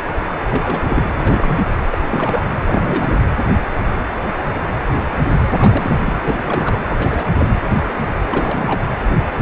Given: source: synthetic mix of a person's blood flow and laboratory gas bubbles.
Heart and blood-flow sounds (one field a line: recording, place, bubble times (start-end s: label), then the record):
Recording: Doppler ultrasound of blood flow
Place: precordium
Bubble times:
0.44-1.03 s: bubbles
1.21-1.65 s: bubbles
1.90-1.98 s: bubbles
2.02-2.48 s: bubbles
2.67-3.24 s: bubbles
5.50-6.13 s: bubbles
6.22-6.77 s: bubbles
6.89-7.25 s: bubbles
7.38-7.51 s: bubbles
8.29-8.81 s: bubbles
From the record:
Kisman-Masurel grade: 332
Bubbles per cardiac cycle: rolling drumbeat, 9 or more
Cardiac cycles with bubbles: 50 to 99%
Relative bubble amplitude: moderate (0.250 to 0.450)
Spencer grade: 3 (all of the cardiac periods contain showers or single bubble signals, but not dominating or overriding the cardiac motion signals)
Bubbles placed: anywhere in the cardiac cycle